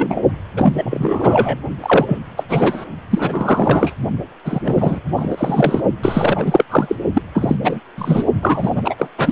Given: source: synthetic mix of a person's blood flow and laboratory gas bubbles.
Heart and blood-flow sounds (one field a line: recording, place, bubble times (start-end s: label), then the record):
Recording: Doppler ultrasound of blood flow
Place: precordium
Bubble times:
0.00-0.21 s: bubbles
0.56-0.74 s: bubbles
0.77-1.59 s: bubbles
1.82-2.18 s: bubbles
2.37-2.44 s: bubbles
2.49-2.85 s: bubbles
3.10-3.95 s: bubbles
4.45-4.61 s: bubbles
4.64-5.00 s: bubbles
5.16-5.80 s: bubbles
6.02-6.64 s: bubbles
6.70-6.96 s: bubbles
7.13-7.22 s: bubbles
7.35-7.56 s: bubbles
7.62-7.80 s: bubbles
7.97-8.23 s: bubbles
8.41-8.71 s: bubbles
8.74-8.96 s: bubbles
8.98-9.07 s: bubbles
9.17-9.32 s: bubbles
From the record:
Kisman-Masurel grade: 343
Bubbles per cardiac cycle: rolling drumbeat, 9 or more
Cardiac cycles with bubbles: 100%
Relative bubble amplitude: loud (0.450 to 0.775)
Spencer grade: 3 (all of the cardiac periods contain showers or single bubble signals, but not dominating or overriding the cardiac motion signals)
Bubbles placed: only in the low amplitude regions of the cardiac cycle